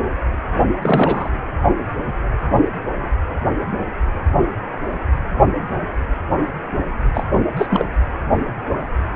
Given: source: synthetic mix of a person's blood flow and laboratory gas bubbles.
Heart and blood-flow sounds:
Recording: Doppler ultrasound of blood flow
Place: precordium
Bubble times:
0.82-1.30 s: bubbles
7.14-7.24 s: bubbles
7.57-7.67 s: bubbles
7.69-7.85 s: bubbles
From the record:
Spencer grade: 2 (many but less than half of the cardiac periods contain bubble signals, singularly or in groups)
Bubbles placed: only in the low amplitude regions of the cardiac cycle

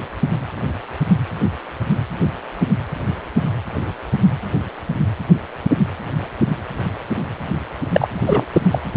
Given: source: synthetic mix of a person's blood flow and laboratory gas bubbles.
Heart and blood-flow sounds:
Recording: Doppler ultrasound of blood flow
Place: precordium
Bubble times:
7.92-8.08 s: bubbles
8.26-8.45 s: bubbles
8.53-8.62 s: bubbles
8.71-8.79 s: bubbles
From the record:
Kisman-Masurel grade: 213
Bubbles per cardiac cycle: several, 3 to 8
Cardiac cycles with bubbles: 1 to 10%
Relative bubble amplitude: loud (0.450 to 0.775)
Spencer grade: 1 (occasional bubble signal discernible with the cardiac motion signal, with majority of cardiac periods free of bubbles)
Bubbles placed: anywhere in the cardiac cycle

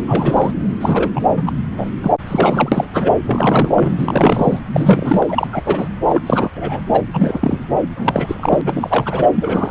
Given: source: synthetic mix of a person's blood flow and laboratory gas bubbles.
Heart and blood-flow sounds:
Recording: Doppler ultrasound of blood flow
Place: subclavian vein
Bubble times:
0.08-0.52 s: bubbles
0.80-1.52 s: bubbles
1.78-1.89 s: bubbles
2.02-2.11 s: bubbles
2.26-2.89 s: bubbles
2.93-3.13 s: bubbles
3.25-3.92 s: bubbles
3.98-4.59 s: bubbles
4.72-5.47 s: bubbles
5.52-5.62 s: bubbles
5.65-5.88 s: bubbles
6.08-6.51 s: bubbles
6.55-6.83 s: bubbles
6.92-7.01 s: bubbles
7.12-7.66 s: bubbles
7.96-8.62 s: bubbles
8.64-9.29 s: bubbles
9.36-9.70 s: bubbles
From the record:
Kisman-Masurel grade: 343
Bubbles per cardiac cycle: rolling drumbeat, 9 or more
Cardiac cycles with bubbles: 100%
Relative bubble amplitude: loud (0.450 to 0.775)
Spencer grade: 3 (all of the cardiac periods contain showers or single bubble signals, but not dominating or overriding the cardiac motion signals)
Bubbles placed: anywhere in the cardiac cycle

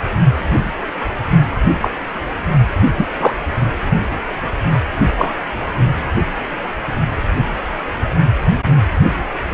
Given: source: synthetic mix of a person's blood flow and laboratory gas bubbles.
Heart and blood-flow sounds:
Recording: Doppler ultrasound of blood flow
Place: precordium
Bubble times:
1.81-1.90 s: bubbles
2.98-3.06 s: bubbles
3.19-3.33 s: bubbles
5.17-5.33 s: bubbles
From the record:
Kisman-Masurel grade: 123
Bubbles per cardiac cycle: 1 to 2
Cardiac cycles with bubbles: 10 to 50%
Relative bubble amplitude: loud (0.450 to 0.775)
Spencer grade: 2 (many but less than half of the cardiac periods contain bubble signals, singularly or in groups)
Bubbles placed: anywhere in the cardiac cycle

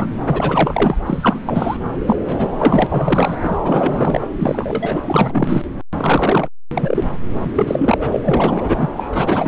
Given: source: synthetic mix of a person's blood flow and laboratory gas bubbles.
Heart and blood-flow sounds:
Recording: Doppler ultrasound of blood flow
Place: subclavian vein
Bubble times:
0.00-0.08 s: bubbles
0.26-0.99 s: bubbles
1.06-1.40 s: bubbles
1.46-1.77 s: bubbles
2.07-2.17 s: bubbles
2.22-2.50 s: bubbles
2.58-2.87 s: bubbles
2.89-3.39 s: bubbles
3.43-3.58 s: bubbles
3.64-4.27 s: bubbles
4.38-5.02 s: bubbles
5.06-5.62 s: bubbles
5.98-6.48 s: bubbles
6.75-7.04 s: bubbles
7.43-7.50 s: bubbles
7.55-7.97 s: bubbles
8.00-8.19 s: bubbles
8.24-8.90 s: bubbles
8.96-9.47 s: bubbles
From the record:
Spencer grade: 3 (all of the cardiac periods contain showers or single bubble signals, but not dominating or overriding the cardiac motion signals)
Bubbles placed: anywhere in the cardiac cycle

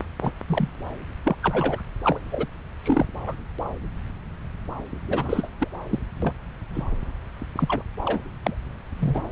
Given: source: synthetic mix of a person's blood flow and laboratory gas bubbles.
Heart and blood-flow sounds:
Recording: Doppler ultrasound of blood flow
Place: subclavian vein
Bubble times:
0.00-0.03 s: bubbles
0.21-0.32 s: bubbles
0.47-0.68 s: bubbles
1.25-1.36 s: bubbles
1.42-1.81 s: bubbles
2.04-2.20 s: bubbles
2.32-2.47 s: bubbles
2.83-3.06 s: bubbles
3.26-3.34 s: bubbles
5.07-5.50 s: bubbles
5.60-5.68 s: bubbles
5.90-6.00 s: bubbles
6.22-6.33 s: bubbles
6.75-6.83 s: bubbles
7.55-7.82 s: bubbles
8.05-8.19 s: bubbles
8.43-8.55 s: bubbles
9.00-9.21 s: bubbles
From the record:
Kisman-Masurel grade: 232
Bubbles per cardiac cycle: several, 3 to 8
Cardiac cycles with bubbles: 50 to 99%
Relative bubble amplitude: moderate (0.250 to 0.450)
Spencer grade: 3 (all of the cardiac periods contain showers or single bubble signals, but not dominating or overriding the cardiac motion signals)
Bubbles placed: anywhere in the cardiac cycle

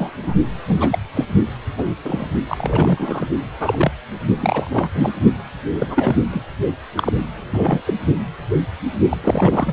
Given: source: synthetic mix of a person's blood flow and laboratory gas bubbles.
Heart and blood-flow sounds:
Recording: Doppler ultrasound of blood flow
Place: precordium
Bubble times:
0.00-0.11 s: bubbles
0.23-0.33 s: bubbles
0.67-0.98 s: bubbles
1.15-1.25 s: bubbles
1.78-1.83 s: bubbles
2.04-2.26 s: bubbles
2.47-3.26 s: bubbles
3.60-3.92 s: bubbles
4.42-4.89 s: bubbles
4.95-5.09 s: bubbles
5.79-6.17 s: bubbles
6.30-6.45 s: bubbles
6.96-7.11 s: bubbles
7.27-7.80 s: bubbles
7.87-7.94 s: bubbles
9.09-9.17 s: bubbles
9.23-9.73 s: bubbles
From the record:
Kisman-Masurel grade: 232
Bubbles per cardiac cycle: several, 3 to 8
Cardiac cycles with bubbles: 50 to 99%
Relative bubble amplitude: moderate (0.250 to 0.450)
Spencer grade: 3 (all of the cardiac periods contain showers or single bubble signals, but not dominating or overriding the cardiac motion signals)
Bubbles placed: only in the low amplitude regions of the cardiac cycle

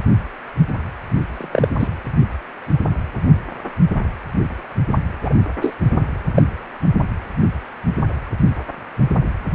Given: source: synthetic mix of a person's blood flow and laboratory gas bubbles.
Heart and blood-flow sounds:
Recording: Doppler ultrasound of blood flow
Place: precordium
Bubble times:
1.27-1.69 s: bubbles
1.79-1.88 s: bubbles
5.22-5.33 s: bubbles
5.61-5.75 s: bubbles
6.35-6.43 s: bubbles
From the record:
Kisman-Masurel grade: 123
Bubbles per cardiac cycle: 1 to 2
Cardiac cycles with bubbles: 10 to 50%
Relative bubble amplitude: loud (0.450 to 0.775)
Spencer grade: 2 (many but less than half of the cardiac periods contain bubble signals, singularly or in groups)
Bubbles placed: anywhere in the cardiac cycle

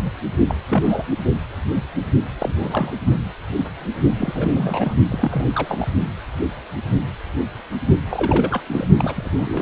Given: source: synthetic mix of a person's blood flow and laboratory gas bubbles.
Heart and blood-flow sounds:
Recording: Doppler ultrasound of blood flow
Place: precordium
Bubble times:
0.04-0.11 s: bubbles
0.48-0.55 s: bubbles
0.69-1.04 s: bubbles
2.39-2.92 s: bubbles
4.17-4.96 s: bubbles
5.10-5.88 s: bubbles
8.09-8.63 s: bubbles
8.66-8.87 s: bubbles
8.99-9.30 s: bubbles
9.38-9.62 s: bubbles
From the record:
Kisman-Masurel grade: 332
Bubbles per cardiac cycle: rolling drumbeat, 9 or more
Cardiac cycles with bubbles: 50 to 99%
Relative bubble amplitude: moderate (0.250 to 0.450)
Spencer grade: 3 (all of the cardiac periods contain showers or single bubble signals, but not dominating or overriding the cardiac motion signals)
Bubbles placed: only in the low amplitude regions of the cardiac cycle

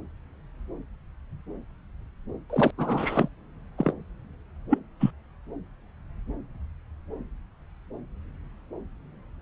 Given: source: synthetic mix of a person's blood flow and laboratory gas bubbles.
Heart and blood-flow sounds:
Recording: Doppler ultrasound of blood flow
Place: subclavian vein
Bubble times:
2.49-2.71 s: bubbles
2.77-3.28 s: bubbles
3.78-3.93 s: bubbles
4.71-4.79 s: bubbles
5.00-5.10 s: bubbles
From the record:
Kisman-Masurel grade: 222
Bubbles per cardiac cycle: several, 3 to 8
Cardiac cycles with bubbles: 10 to 50%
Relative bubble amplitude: moderate (0.250 to 0.450)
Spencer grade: 2 (many but less than half of the cardiac periods contain bubble signals, singularly or in groups)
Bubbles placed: anywhere in the cardiac cycle

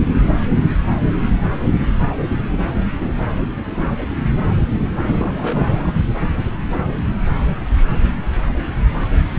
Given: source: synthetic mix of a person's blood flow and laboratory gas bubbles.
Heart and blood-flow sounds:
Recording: Doppler ultrasound of blood flow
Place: subclavian vein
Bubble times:
5.00-5.92 s: bubbles
From the record:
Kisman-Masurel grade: 221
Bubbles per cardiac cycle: several, 3 to 8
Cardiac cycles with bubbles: 10 to 50%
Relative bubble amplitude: barely perceptible (0.100 to 0.250)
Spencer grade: 2 (many but less than half of the cardiac periods contain bubble signals, singularly or in groups)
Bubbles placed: anywhere in the cardiac cycle

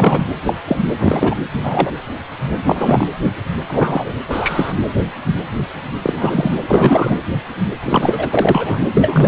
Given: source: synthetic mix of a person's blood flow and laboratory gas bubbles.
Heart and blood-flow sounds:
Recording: Doppler ultrasound of blood flow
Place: precordium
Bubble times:
0.00-0.27 s: bubbles
0.46-0.54 s: bubbles
0.68-0.78 s: bubbles
0.99-1.34 s: bubbles
1.53-1.60 s: bubbles
1.63-1.91 s: bubbles
2.66-3.08 s: bubbles
3.67-4.13 s: bubbles
4.27-4.73 s: bubbles
6.02-6.54 s: bubbles
6.60-7.17 s: bubbles
7.84-8.87 s: bubbles
8.94-9.28 s: bubbles
From the record:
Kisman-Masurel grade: 233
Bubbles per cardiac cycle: several, 3 to 8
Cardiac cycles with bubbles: 50 to 99%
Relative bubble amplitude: loud (0.450 to 0.775)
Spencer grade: 3 (all of the cardiac periods contain showers or single bubble signals, but not dominating or overriding the cardiac motion signals)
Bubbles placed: anywhere in the cardiac cycle

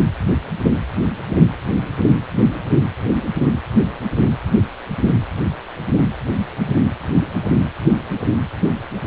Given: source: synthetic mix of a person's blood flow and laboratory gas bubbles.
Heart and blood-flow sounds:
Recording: Doppler ultrasound of blood flow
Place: precordium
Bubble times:
no bubbles
From the record:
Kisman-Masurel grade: 000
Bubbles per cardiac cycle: 0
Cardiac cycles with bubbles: 0%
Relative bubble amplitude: no bubbles discernible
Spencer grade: 0 (complete lack of bubble signals)

